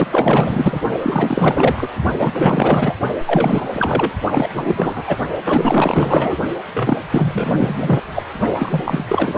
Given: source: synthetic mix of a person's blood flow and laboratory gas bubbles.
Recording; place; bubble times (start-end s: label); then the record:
Doppler ultrasound of blood flow; precordium
0.00-0.07 s: bubbles
0.11-0.81 s: bubbles
1.02-1.88 s: bubbles
2.19-2.94 s: bubbles
3.26-4.12 s: bubbles
4.31-4.49 s: bubbles
4.54-5.04 s: bubbles
5.07-5.17 s: bubbles
5.44-6.36 s: bubbles
6.74-7.00 s: bubbles
7.12-8.02 s: bubbles
8.13-8.22 s: bubbles
8.59-9.04 s: bubbles
9.07-9.37 s: bubbles
From the record:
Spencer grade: 4 (maximum detectable bubble signal sounding continuously throughout systole and diastole of every cardiac period, and overriding the amplitude of the normal cardiac signals); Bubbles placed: only in the low amplitude regions of the cardiac cycle